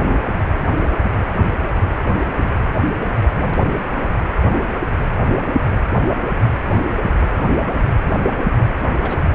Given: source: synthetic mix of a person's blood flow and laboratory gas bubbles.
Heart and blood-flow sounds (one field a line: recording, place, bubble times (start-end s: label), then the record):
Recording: Doppler ultrasound of blood flow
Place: precordium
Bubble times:
8.99-9.21 s: bubbles
From the record:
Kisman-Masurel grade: 112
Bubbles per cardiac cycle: 1 to 2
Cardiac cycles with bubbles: 1 to 10%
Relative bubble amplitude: moderate (0.250 to 0.450)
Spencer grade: 1 (occasional bubble signal discernible with the cardiac motion signal, with majority of cardiac periods free of bubbles)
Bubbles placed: anywhere in the cardiac cycle